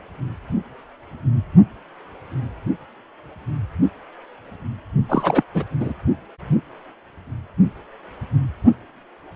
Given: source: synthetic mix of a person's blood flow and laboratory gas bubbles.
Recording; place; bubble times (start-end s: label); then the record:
Doppler ultrasound of blood flow; precordium
5.09-5.43 s: bubbles
5.54-5.64 s: bubbles
5.79-5.93 s: bubbles
From the record:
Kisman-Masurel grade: 212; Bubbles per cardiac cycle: several, 3 to 8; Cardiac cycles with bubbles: 1 to 10%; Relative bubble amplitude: moderate (0.250 to 0.450); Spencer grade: 1 (occasional bubble signal discernible with the cardiac motion signal, with majority of cardiac periods free of bubbles); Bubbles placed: only in the low amplitude regions of the cardiac cycle